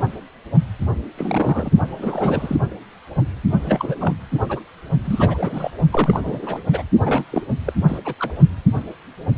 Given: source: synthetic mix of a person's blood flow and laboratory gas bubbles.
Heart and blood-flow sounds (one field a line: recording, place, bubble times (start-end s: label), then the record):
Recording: Doppler ultrasound of blood flow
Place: precordium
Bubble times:
1.18-1.71 s: bubbles
1.99-2.57 s: bubbles
3.63-4.13 s: bubbles
4.49-4.60 s: bubbles
5.04-5.71 s: bubbles
5.91-6.61 s: bubbles
6.71-6.83 s: bubbles
7.06-7.24 s: bubbles
7.32-7.42 s: bubbles
7.66-7.73 s: bubbles
7.88-7.98 s: bubbles
8.04-8.14 s: bubbles
8.20-8.33 s: bubbles
From the record:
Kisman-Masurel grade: 332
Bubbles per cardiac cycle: rolling drumbeat, 9 or more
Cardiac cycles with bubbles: 50 to 99%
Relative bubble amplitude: moderate (0.250 to 0.450)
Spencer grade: 3 (all of the cardiac periods contain showers or single bubble signals, but not dominating or overriding the cardiac motion signals)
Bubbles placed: only in the low amplitude regions of the cardiac cycle